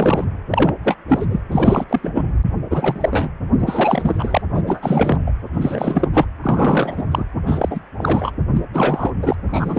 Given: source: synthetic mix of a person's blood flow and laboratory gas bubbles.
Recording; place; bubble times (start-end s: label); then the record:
Doppler ultrasound of blood flow; precordium
0.00-0.25 s: bubbles
0.50-0.74 s: bubbles
0.84-0.96 s: bubbles
1.08-1.26 s: bubbles
1.29-1.41 s: bubbles
1.52-1.85 s: bubbles
1.89-2.00 s: bubbles
2.03-2.25 s: bubbles
2.70-3.29 s: bubbles
3.60-4.42 s: bubbles
4.54-4.62 s: bubbles
4.66-5.31 s: bubbles
5.52-6.08 s: bubbles
6.13-6.25 s: bubbles
6.42-7.24 s: bubbles
7.46-7.80 s: bubbles
7.97-8.31 s: bubbles
8.54-8.62 s: bubbles
8.72-9.12 s: bubbles
9.22-9.36 s: bubbles
9.46-9.79 s: bubbles
From the record:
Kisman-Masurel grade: 343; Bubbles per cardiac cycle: rolling drumbeat, 9 or more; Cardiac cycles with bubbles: 100%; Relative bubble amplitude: loud (0.450 to 0.775); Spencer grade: 3 (all of the cardiac periods contain showers or single bubble signals, but not dominating or overriding the cardiac motion signals); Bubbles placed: anywhere in the cardiac cycle